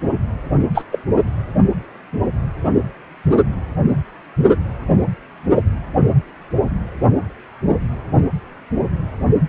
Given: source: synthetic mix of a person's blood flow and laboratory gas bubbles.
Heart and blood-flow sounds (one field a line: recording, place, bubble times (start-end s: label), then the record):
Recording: Doppler ultrasound of blood flow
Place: precordium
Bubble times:
0.74-0.84 s: bubbles
0.92-0.99 s: bubbles
From the record:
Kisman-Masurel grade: 113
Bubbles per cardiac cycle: 1 to 2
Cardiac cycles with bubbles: 1 to 10%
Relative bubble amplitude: loud (0.450 to 0.775)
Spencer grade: 1 (occasional bubble signal discernible with the cardiac motion signal, with majority of cardiac periods free of bubbles)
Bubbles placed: anywhere in the cardiac cycle